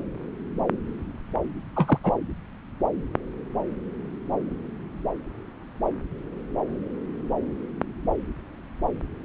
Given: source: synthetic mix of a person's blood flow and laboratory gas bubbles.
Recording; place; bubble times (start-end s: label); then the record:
Doppler ultrasound of blood flow; subclavian vein
1.75-1.98 s: bubbles
2.03-2.12 s: bubbles
From the record:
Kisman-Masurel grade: 212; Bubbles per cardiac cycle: several, 3 to 8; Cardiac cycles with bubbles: 1 to 10%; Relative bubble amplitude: moderate (0.250 to 0.450); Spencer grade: 1 (occasional bubble signal discernible with the cardiac motion signal, with majority of cardiac periods free of bubbles); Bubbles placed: anywhere in the cardiac cycle